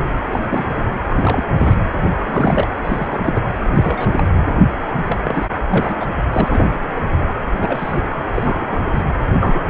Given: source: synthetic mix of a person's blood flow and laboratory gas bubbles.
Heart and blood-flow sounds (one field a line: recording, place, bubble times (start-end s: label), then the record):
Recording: Doppler ultrasound of blood flow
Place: precordium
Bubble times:
0.00-0.06 s: bubbles
0.29-0.39 s: bubbles
0.49-0.66 s: bubbles
1.09-1.43 s: bubbles
1.56-1.81 s: bubbles
2.03-2.10 s: bubbles
2.26-2.67 s: bubbles
2.86-3.07 s: bubbles
3.11-3.40 s: bubbles
3.74-4.24 s: bubbles
5.07-5.18 s: bubbles
5.25-5.46 s: bubbles
5.70-5.95 s: bubbles
6.00-6.06 s: bubbles
6.33-6.77 s: bubbles
6.96-7.02 s: bubbles
7.21-7.27 s: bubbles
7.57-8.03 s: bubbles
8.35-8.81 s: bubbles
8.93-9.04 s: bubbles
9.39-9.62 s: bubbles
From the record:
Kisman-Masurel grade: 242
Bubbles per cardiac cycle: several, 3 to 8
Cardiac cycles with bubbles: 100%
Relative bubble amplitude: moderate (0.250 to 0.450)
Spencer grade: 3 (all of the cardiac periods contain showers or single bubble signals, but not dominating or overriding the cardiac motion signals)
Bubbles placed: anywhere in the cardiac cycle